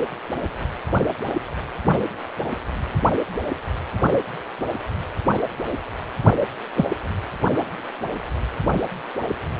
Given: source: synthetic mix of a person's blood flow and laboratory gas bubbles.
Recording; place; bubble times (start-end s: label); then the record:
Doppler ultrasound of blood flow; precordium
6.76-6.90 s: bubbles
From the record:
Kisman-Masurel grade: 123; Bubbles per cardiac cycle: 1 to 2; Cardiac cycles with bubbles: 10 to 50%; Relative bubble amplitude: loud (0.450 to 0.775); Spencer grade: 2 (many but less than half of the cardiac periods contain bubble signals, singularly or in groups); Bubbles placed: anywhere in the cardiac cycle